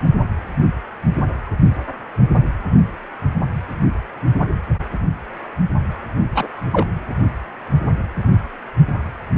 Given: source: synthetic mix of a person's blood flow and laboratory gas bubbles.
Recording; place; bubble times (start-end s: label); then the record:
Doppler ultrasound of blood flow; precordium
6.34-6.47 s: bubbles
6.72-6.85 s: bubbles
From the record:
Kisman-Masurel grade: 113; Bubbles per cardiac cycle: 1 to 2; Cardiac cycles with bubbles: 1 to 10%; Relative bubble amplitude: loud (0.450 to 0.775); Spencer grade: 1 (occasional bubble signal discernible with the cardiac motion signal, with majority of cardiac periods free of bubbles); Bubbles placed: only in the low amplitude regions of the cardiac cycle